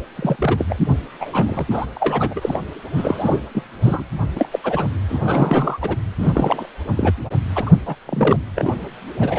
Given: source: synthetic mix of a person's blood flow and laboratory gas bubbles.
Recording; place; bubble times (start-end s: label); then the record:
Doppler ultrasound of blood flow; precordium
0.15-0.36 s: bubbles
0.38-0.78 s: bubbles
1.20-1.67 s: bubbles
1.70-1.86 s: bubbles
1.94-2.60 s: bubbles
2.96-3.40 s: bubbles
3.54-3.63 s: bubbles
3.81-4.04 s: bubbles
4.35-4.48 s: bubbles
4.51-4.59 s: bubbles
4.63-4.88 s: bubbles
5.09-5.96 s: bubbles
6.18-6.68 s: bubbles
6.95-7.12 s: bubbles
7.55-7.70 s: bubbles
7.85-7.95 s: bubbles
8.07-8.41 s: bubbles
8.56-8.74 s: bubbles
9.20-9.39 s: bubbles
From the record:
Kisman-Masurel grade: 342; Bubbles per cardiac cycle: rolling drumbeat, 9 or more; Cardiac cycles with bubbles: 100%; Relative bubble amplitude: moderate (0.250 to 0.450); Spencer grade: 3 (all of the cardiac periods contain showers or single bubble signals, but not dominating or overriding the cardiac motion signals); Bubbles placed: anywhere in the cardiac cycle